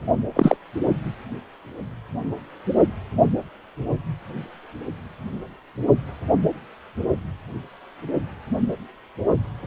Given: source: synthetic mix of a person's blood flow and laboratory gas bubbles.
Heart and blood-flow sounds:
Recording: Doppler ultrasound of blood flow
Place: precordium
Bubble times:
0.36-0.57 s: bubbles
From the record:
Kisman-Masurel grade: 213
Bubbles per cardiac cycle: several, 3 to 8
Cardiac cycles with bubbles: 1 to 10%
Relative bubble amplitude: loud (0.450 to 0.775)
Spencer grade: 1 (occasional bubble signal discernible with the cardiac motion signal, with majority of cardiac periods free of bubbles)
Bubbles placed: anywhere in the cardiac cycle

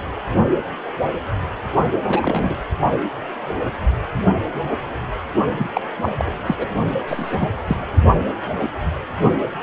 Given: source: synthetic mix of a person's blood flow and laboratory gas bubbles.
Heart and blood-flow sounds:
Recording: Doppler ultrasound of blood flow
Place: precordium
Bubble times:
2.09-2.55 s: bubbles
5.58-5.71 s: bubbles
5.73-5.81 s: bubbles
6.02-6.13 s: bubbles
6.17-6.37 s: bubbles
6.46-6.67 s: bubbles
7.07-7.49 s: bubbles
7.65-7.77 s: bubbles
From the record:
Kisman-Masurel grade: 222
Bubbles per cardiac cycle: several, 3 to 8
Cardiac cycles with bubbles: 10 to 50%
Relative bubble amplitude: moderate (0.250 to 0.450)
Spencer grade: 2 (many but less than half of the cardiac periods contain bubble signals, singularly or in groups)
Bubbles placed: only in the low amplitude regions of the cardiac cycle

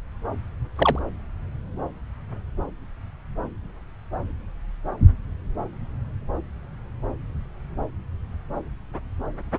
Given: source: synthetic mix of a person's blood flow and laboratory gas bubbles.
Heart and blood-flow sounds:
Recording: Doppler ultrasound of blood flow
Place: subclavian vein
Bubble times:
0.76-0.99 s: bubbles
From the record:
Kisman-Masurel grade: 113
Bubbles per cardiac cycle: 1 to 2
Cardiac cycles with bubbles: 1 to 10%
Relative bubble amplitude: loud (0.450 to 0.775)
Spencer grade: 1 (occasional bubble signal discernible with the cardiac motion signal, with majority of cardiac periods free of bubbles)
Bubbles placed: anywhere in the cardiac cycle

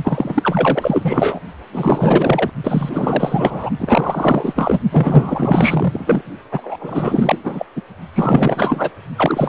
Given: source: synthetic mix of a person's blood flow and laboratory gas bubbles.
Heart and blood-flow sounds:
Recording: Doppler ultrasound of blood flow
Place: precordium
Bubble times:
0.05-1.41 s: bubbles
1.72-2.50 s: bubbles
2.64-3.70 s: bubbles
3.79-4.79 s: bubbles
4.92-6.22 s: bubbles
6.52-7.38 s: bubbles
7.44-7.66 s: bubbles
7.76-7.82 s: bubbles
8.12-8.90 s: bubbles
9.15-9.49 s: bubbles
From the record:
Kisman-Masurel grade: 444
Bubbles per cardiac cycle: continuous sound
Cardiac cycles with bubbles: 100%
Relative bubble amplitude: maximal (0.775 to 0.999)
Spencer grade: 4 (maximum detectable bubble signal sounding continuously throughout systole and diastole of every cardiac period, and overriding the amplitude of the normal cardiac signals)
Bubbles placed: only in the low amplitude regions of the cardiac cycle

